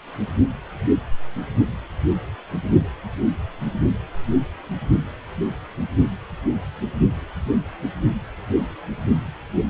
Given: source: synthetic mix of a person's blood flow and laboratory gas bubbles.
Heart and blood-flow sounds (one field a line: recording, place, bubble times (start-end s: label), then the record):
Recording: Doppler ultrasound of blood flow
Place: precordium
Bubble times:
no bubbles
From the record:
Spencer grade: 0 (complete lack of bubble signals)